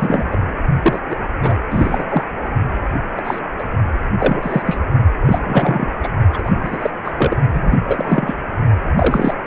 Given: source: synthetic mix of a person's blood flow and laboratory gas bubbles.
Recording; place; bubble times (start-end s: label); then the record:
Doppler ultrasound of blood flow; precordium
0.00-0.26 s: bubbles
0.32-0.38 s: bubbles
0.82-0.99 s: bubbles
1.09-1.17 s: bubbles
1.42-1.59 s: bubbles
1.70-2.04 s: bubbles
2.09-2.24 s: bubbles
3.17-3.22 s: bubbles
3.24-3.40 s: bubbles
3.58-3.64 s: bubbles
4.19-4.62 s: bubbles
4.66-4.79 s: bubbles
5.26-5.89 s: bubbles
6.03-6.08 s: bubbles
6.33-6.52 s: bubbles
6.55-6.90 s: bubbles
7.04-7.11 s: bubbles
7.17-7.36 s: bubbles
7.53-7.77 s: bubbles
7.88-8.35 s: bubbles
8.96-9.33 s: bubbles
From the record:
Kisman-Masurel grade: 243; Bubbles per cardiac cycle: several, 3 to 8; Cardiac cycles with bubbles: 100%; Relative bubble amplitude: loud (0.450 to 0.775); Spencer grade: 3 (all of the cardiac periods contain showers or single bubble signals, but not dominating or overriding the cardiac motion signals); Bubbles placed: only in the low amplitude regions of the cardiac cycle